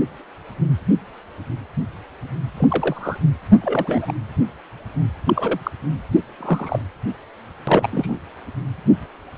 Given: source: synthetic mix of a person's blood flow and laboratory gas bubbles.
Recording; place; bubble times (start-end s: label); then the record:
Doppler ultrasound of blood flow; precordium
2.57-3.18 s: bubbles
3.60-4.13 s: bubbles
5.27-5.60 s: bubbles
5.63-5.71 s: bubbles
6.38-6.79 s: bubbles
7.67-7.87 s: bubbles
7.91-8.19 s: bubbles
From the record:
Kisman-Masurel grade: 222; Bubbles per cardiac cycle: several, 3 to 8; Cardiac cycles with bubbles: 10 to 50%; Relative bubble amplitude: moderate (0.250 to 0.450); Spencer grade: 2 (many but less than half of the cardiac periods contain bubble signals, singularly or in groups); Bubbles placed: anywhere in the cardiac cycle